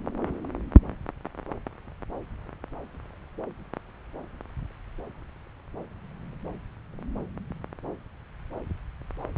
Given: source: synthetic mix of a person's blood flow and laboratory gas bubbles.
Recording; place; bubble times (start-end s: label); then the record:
Doppler ultrasound of blood flow; subclavian vein
no bubbles
From the record:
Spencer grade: 0 (complete lack of bubble signals)